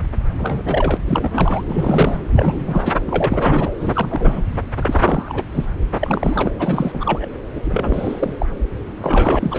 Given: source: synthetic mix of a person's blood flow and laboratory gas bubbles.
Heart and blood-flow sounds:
Doppler ultrasound of blood flow; subclavian vein
0.38-0.97 s: bubbles
1.05-1.64 s: bubbles
1.68-2.23 s: bubbles
2.35-2.96 s: bubbles
3.07-3.73 s: bubbles
3.79-4.44 s: bubbles
4.79-5.45 s: bubbles
5.52-5.66 s: bubbles
5.99-6.52 s: bubbles
6.59-7.29 s: bubbles
7.55-7.61 s: bubbles
7.64-8.36 s: bubbles
8.38-8.46 s: bubbles
8.97-9.58 s: bubbles
From the record:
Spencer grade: 3 (all of the cardiac periods contain showers or single bubble signals, but not dominating or overriding the cardiac motion signals); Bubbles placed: anywhere in the cardiac cycle

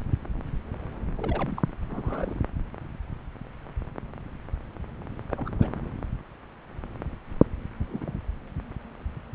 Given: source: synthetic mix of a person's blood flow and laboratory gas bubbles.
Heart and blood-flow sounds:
Doppler ultrasound of blood flow; subclavian vein
1.17-1.74 s: bubbles
1.88-2.40 s: bubbles
5.30-5.50 s: bubbles
5.58-5.68 s: bubbles
7.79-8.20 s: bubbles
From the record:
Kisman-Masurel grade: 221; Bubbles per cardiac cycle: several, 3 to 8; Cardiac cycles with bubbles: 10 to 50%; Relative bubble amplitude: barely perceptible (0.100 to 0.250); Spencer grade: 2 (many but less than half of the cardiac periods contain bubble signals, singularly or in groups); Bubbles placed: anywhere in the cardiac cycle

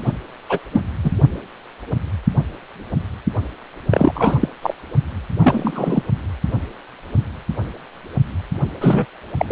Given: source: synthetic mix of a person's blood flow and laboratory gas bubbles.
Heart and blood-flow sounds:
Doppler ultrasound of blood flow; precordium
0.05-0.14 s: bubbles
0.49-0.59 s: bubbles
0.73-0.81 s: bubbles
1.04-1.11 s: bubbles
3.90-4.48 s: bubbles
4.62-4.74 s: bubbles
5.40-6.02 s: bubbles
8.81-9.06 s: bubbles
9.38-9.46 s: bubbles
9.50-9.52 s: bubbles
From the record:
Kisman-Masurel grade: 223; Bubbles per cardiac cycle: several, 3 to 8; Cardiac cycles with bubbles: 10 to 50%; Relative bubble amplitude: loud (0.450 to 0.775); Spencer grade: 2 (many but less than half of the cardiac periods contain bubble signals, singularly or in groups); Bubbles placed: only in the low amplitude regions of the cardiac cycle

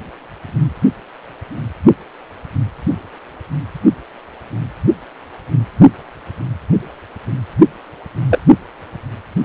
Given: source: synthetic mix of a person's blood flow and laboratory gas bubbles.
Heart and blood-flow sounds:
Doppler ultrasound of blood flow; precordium
8.29-8.39 s: bubbles
From the record:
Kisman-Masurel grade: 113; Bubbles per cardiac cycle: 1 to 2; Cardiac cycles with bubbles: 1 to 10%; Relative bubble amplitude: loud (0.450 to 0.775); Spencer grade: 1 (occasional bubble signal discernible with the cardiac motion signal, with majority of cardiac periods free of bubbles); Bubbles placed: anywhere in the cardiac cycle

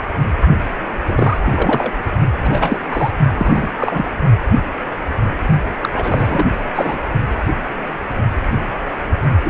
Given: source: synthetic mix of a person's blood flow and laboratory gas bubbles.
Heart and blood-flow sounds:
Doppler ultrasound of blood flow; precordium
1.06-1.38 s: bubbles
1.46-1.92 s: bubbles
2.43-2.78 s: bubbles
2.92-3.10 s: bubbles
3.35-3.73 s: bubbles
3.77-4.05 s: bubbles
5.82-5.89 s: bubbles
5.93-6.45 s: bubbles
6.74-6.99 s: bubbles
9.44-9.50 s: bubbles
From the record:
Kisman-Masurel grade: 332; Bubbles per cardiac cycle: rolling drumbeat, 9 or more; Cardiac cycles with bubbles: 50 to 99%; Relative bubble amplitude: moderate (0.250 to 0.450); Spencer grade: 3 (all of the cardiac periods contain showers or single bubble signals, but not dominating or overriding the cardiac motion signals); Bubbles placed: only in the low amplitude regions of the cardiac cycle

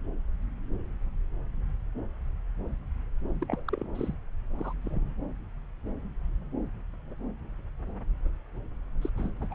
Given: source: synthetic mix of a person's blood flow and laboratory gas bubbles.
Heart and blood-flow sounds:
Doppler ultrasound of blood flow; subclavian vein
3.41-3.64 s: bubbles
3.68-3.87 s: bubbles
3.95-4.14 s: bubbles
4.59-4.73 s: bubbles
4.83-5.12 s: bubbles
9.02-9.10 s: bubbles
9.17-9.31 s: bubbles
9.40-9.46 s: bubbles
9.51-9.55 s: bubbles
From the record:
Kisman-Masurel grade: 221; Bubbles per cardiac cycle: several, 3 to 8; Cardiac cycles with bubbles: 10 to 50%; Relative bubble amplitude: barely perceptible (0.100 to 0.250); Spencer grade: 2 (many but less than half of the cardiac periods contain bubble signals, singularly or in groups); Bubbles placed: anywhere in the cardiac cycle

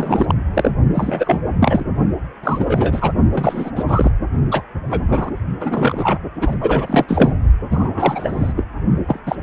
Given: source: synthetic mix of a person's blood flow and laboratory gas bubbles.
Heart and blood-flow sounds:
Doppler ultrasound of blood flow; precordium
0.00-0.35 s: bubbles
0.54-0.71 s: bubbles
0.95-1.41 s: bubbles
1.59-1.86 s: bubbles
2.44-3.12 s: bubbles
3.31-3.71 s: bubbles
3.75-3.83 s: bubbles
3.88-4.11 s: bubbles
4.51-4.62 s: bubbles
4.90-5.05 s: bubbles
5.08-5.30 s: bubbles
5.60-6.18 s: bubbles
6.40-6.58 s: bubbles
6.60-7.05 s: bubbles
7.08-7.37 s: bubbles
7.71-8.53 s: bubbles
8.55-8.65 s: bubbles
9.07-9.19 s: bubbles
9.25-9.35 s: bubbles
From the record:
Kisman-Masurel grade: 343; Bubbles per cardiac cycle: rolling drumbeat, 9 or more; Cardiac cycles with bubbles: 100%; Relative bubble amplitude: loud (0.450 to 0.775); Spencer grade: 3 (all of the cardiac periods contain showers or single bubble signals, but not dominating or overriding the cardiac motion signals); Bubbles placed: only in the low amplitude regions of the cardiac cycle

